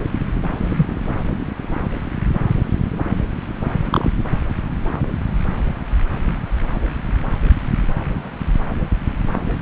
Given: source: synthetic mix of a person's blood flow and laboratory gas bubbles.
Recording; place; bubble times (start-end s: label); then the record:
Doppler ultrasound of blood flow; subclavian vein
0.69-0.86 s: bubbles
3.90-4.11 s: bubbles
From the record:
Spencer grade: 2 (many but less than half of the cardiac periods contain bubble signals, singularly or in groups); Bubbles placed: anywhere in the cardiac cycle